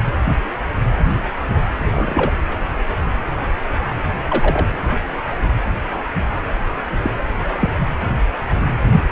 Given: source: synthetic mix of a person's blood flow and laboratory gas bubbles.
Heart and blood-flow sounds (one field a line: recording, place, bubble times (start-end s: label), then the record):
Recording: Doppler ultrasound of blood flow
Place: precordium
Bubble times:
1.84-2.33 s: bubbles
4.29-4.67 s: bubbles
7.03-7.10 s: bubbles
7.44-7.70 s: bubbles
8.97-9.04 s: bubbles
From the record:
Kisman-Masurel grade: 122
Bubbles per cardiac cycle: 1 to 2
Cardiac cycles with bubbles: 10 to 50%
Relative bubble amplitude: moderate (0.250 to 0.450)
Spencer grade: 2 (many but less than half of the cardiac periods contain bubble signals, singularly or in groups)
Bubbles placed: anywhere in the cardiac cycle